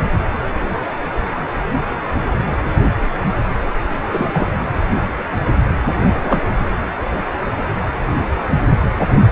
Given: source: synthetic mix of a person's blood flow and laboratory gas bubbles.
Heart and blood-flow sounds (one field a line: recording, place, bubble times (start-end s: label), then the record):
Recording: Doppler ultrasound of blood flow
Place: precordium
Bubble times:
4.12-4.52 s: bubbles
6.04-6.41 s: bubbles
From the record:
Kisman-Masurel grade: 212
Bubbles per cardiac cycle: several, 3 to 8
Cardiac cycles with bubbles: 1 to 10%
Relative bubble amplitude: moderate (0.250 to 0.450)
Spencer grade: 1 (occasional bubble signal discernible with the cardiac motion signal, with majority of cardiac periods free of bubbles)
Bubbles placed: anywhere in the cardiac cycle